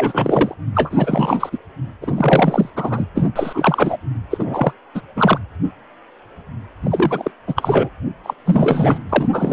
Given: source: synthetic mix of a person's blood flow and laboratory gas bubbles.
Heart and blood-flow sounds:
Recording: Doppler ultrasound of blood flow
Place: precordium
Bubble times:
0.00-0.54 s: bubbles
0.74-1.58 s: bubbles
2.02-2.70 s: bubbles
2.76-3.05 s: bubbles
3.15-3.30 s: bubbles
3.35-3.98 s: bubbles
4.31-4.73 s: bubbles
4.95-5.01 s: bubbles
5.16-5.39 s: bubbles
6.83-7.32 s: bubbles
7.47-7.89 s: bubbles
8.24-8.34 s: bubbles
8.46-8.98 s: bubbles
9.09-9.29 s: bubbles
9.32-9.53 s: bubbles
From the record:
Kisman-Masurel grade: 333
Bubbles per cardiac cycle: rolling drumbeat, 9 or more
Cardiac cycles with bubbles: 50 to 99%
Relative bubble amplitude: loud (0.450 to 0.775)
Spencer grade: 3 (all of the cardiac periods contain showers or single bubble signals, but not dominating or overriding the cardiac motion signals)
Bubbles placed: anywhere in the cardiac cycle

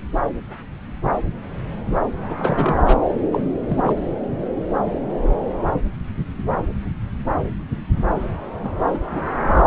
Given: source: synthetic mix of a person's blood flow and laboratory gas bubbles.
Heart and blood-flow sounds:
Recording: Doppler ultrasound of blood flow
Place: subclavian vein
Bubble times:
2.29-2.35 s: bubbles
2.38-2.97 s: bubbles
3.32-3.42 s: bubbles
3.69-3.97 s: bubbles
8.63-8.71 s: bubbles
8.93-8.99 s: bubbles
9.10-9.25 s: bubbles
9.43-9.62 s: bubbles
From the record:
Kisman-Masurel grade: 222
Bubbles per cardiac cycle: several, 3 to 8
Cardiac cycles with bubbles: 10 to 50%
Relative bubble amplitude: moderate (0.250 to 0.450)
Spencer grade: 2 (many but less than half of the cardiac periods contain bubble signals, singularly or in groups)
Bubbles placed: anywhere in the cardiac cycle

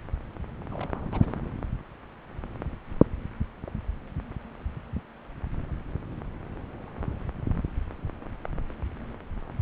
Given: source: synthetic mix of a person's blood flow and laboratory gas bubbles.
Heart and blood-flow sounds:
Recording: Doppler ultrasound of blood flow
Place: subclavian vein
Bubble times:
0.70-1.09 s: bubbles
1.11-1.34 s: bubbles
From the record:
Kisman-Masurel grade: 211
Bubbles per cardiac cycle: several, 3 to 8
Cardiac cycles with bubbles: 1 to 10%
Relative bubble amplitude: barely perceptible (0.100 to 0.250)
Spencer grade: 1 (occasional bubble signal discernible with the cardiac motion signal, with majority of cardiac periods free of bubbles)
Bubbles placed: anywhere in the cardiac cycle

